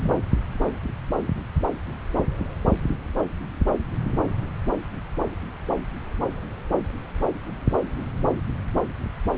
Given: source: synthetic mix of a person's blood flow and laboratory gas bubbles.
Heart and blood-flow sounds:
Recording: Doppler ultrasound of blood flow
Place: subclavian vein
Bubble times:
0.00-0.12 s: bubbles
From the record:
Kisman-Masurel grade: 211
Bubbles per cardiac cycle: several, 3 to 8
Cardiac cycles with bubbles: 1 to 10%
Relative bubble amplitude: barely perceptible (0.100 to 0.250)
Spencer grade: 1 (occasional bubble signal discernible with the cardiac motion signal, with majority of cardiac periods free of bubbles)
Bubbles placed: anywhere in the cardiac cycle

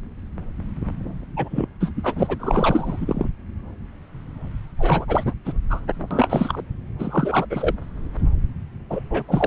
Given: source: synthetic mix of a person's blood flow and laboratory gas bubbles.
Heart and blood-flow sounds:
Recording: Doppler ultrasound of blood flow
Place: subclavian vein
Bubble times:
1.36-1.66 s: bubbles
1.80-1.90 s: bubbles
1.96-2.36 s: bubbles
2.39-2.96 s: bubbles
3.00-3.29 s: bubbles
4.79-5.05 s: bubbles
5.08-5.33 s: bubbles
5.45-5.53 s: bubbles
5.70-5.80 s: bubbles
6.10-6.61 s: bubbles
6.99-7.46 s: bubbles
7.50-7.74 s: bubbles
8.90-9.00 s: bubbles
9.10-9.23 s: bubbles
9.28-9.47 s: bubbles
From the record:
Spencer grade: 3 (all of the cardiac periods contain showers or single bubble signals, but not dominating or overriding the cardiac motion signals)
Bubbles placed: anywhere in the cardiac cycle

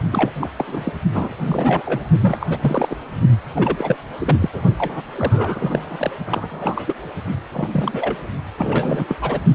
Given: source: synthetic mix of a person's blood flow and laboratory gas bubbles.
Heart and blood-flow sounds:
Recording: Doppler ultrasound of blood flow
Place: precordium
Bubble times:
0.11-0.30 s: bubbles
0.40-0.49 s: bubbles
0.57-0.94 s: bubbles
1.14-1.34 s: bubbles
1.37-2.09 s: bubbles
2.21-2.57 s: bubbles
2.60-2.96 s: bubbles
3.55-3.98 s: bubbles
4.19-4.36 s: bubbles
4.39-4.50 s: bubbles
4.53-4.62 s: bubbles
4.77-5.02 s: bubbles
5.15-6.11 s: bubbles
6.25-6.95 s: bubbles
7.54-7.68 s: bubbles
7.71-8.16 s: bubbles
8.58-9.05 s: bubbles
9.09-9.17 s: bubbles
9.21-9.39 s: bubbles
From the record:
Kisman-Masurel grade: 332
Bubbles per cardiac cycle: rolling drumbeat, 9 or more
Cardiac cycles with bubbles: 50 to 99%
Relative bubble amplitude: moderate (0.250 to 0.450)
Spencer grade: 3 (all of the cardiac periods contain showers or single bubble signals, but not dominating or overriding the cardiac motion signals)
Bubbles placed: only in the low amplitude regions of the cardiac cycle

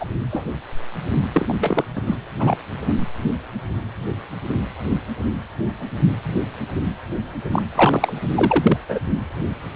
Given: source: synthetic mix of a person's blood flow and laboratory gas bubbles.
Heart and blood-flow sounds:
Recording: Doppler ultrasound of blood flow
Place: precordium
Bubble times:
0.00-0.07 s: bubbles
0.30-0.46 s: bubbles
1.33-1.54 s: bubbles
1.60-1.84 s: bubbles
1.96-2.02 s: bubbles
2.06-2.16 s: bubbles
2.40-2.56 s: bubbles
2.87-2.94 s: bubbles
7.50-7.62 s: bubbles
7.75-8.12 s: bubbles
8.35-8.77 s: bubbles
8.88-9.00 s: bubbles
From the record:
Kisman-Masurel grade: 223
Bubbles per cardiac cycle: several, 3 to 8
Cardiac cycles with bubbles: 10 to 50%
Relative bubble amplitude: loud (0.450 to 0.775)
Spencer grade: 2 (many but less than half of the cardiac periods contain bubble signals, singularly or in groups)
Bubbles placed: anywhere in the cardiac cycle

